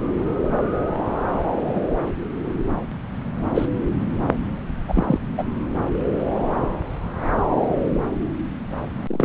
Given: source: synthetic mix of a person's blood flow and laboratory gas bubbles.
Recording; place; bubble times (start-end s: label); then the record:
Doppler ultrasound of blood flow; subclavian vein
1.67-1.81 s: bubbles
3.54-3.66 s: bubbles
4.88-5.20 s: bubbles
5.38-5.44 s: bubbles
9.08-9.25 s: bubbles
From the record:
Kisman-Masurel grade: 122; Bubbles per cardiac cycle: 1 to 2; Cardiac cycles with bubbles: 10 to 50%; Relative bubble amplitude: moderate (0.250 to 0.450); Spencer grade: 2 (many but less than half of the cardiac periods contain bubble signals, singularly or in groups); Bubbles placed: anywhere in the cardiac cycle